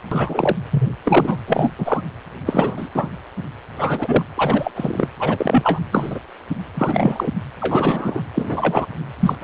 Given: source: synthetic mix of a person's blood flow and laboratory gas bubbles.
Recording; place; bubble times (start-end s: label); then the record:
Doppler ultrasound of blood flow; precordium
0.11-0.56 s: bubbles
0.71-0.96 s: bubbles
1.04-1.36 s: bubbles
1.47-1.74 s: bubbles
1.78-2.01 s: bubbles
2.46-2.88 s: bubbles
2.95-3.09 s: bubbles
3.77-4.23 s: bubbles
4.37-4.71 s: bubbles
4.75-5.08 s: bubbles
5.20-5.79 s: bubbles
5.92-6.19 s: bubbles
6.74-7.31 s: bubbles
7.61-8.21 s: bubbles
8.34-8.87 s: bubbles
9.21-9.35 s: bubbles
9.40-9.44 s: bubbles
From the record:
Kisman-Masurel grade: 243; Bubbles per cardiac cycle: several, 3 to 8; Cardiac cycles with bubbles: 100%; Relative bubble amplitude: loud (0.450 to 0.775); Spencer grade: 3 (all of the cardiac periods contain showers or single bubble signals, but not dominating or overriding the cardiac motion signals); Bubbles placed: anywhere in the cardiac cycle